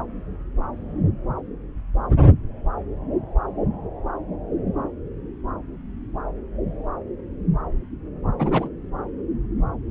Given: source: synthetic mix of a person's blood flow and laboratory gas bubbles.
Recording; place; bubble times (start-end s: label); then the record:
Doppler ultrasound of blood flow; subclavian vein
8.38-8.69 s: bubbles
From the record:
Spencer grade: 1 (occasional bubble signal discernible with the cardiac motion signal, with majority of cardiac periods free of bubbles); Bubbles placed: anywhere in the cardiac cycle